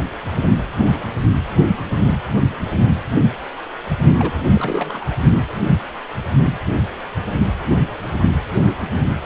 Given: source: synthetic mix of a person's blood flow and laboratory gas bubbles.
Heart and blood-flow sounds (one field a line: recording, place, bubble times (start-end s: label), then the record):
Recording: Doppler ultrasound of blood flow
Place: precordium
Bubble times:
4.18-4.40 s: bubbles
4.46-5.16 s: bubbles
From the record:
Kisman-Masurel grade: 211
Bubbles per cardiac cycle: several, 3 to 8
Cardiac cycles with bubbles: 1 to 10%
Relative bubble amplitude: barely perceptible (0.100 to 0.250)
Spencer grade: 1 (occasional bubble signal discernible with the cardiac motion signal, with majority of cardiac periods free of bubbles)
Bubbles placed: only in the low amplitude regions of the cardiac cycle